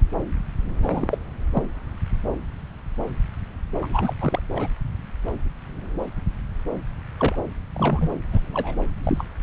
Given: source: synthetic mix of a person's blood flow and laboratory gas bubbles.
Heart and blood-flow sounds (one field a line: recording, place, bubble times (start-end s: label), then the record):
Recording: Doppler ultrasound of blood flow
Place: subclavian vein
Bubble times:
0.81-1.18 s: bubbles
1.54-1.62 s: bubbles
3.81-4.13 s: bubbles
4.21-4.41 s: bubbles
4.54-4.68 s: bubbles
7.19-7.36 s: bubbles
7.73-8.10 s: bubbles
8.32-8.40 s: bubbles
8.54-8.77 s: bubbles
9.04-9.24 s: bubbles
From the record:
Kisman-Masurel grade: 221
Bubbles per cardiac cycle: several, 3 to 8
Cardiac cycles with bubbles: 10 to 50%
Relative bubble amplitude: barely perceptible (0.100 to 0.250)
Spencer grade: 2 (many but less than half of the cardiac periods contain bubble signals, singularly or in groups)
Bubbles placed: anywhere in the cardiac cycle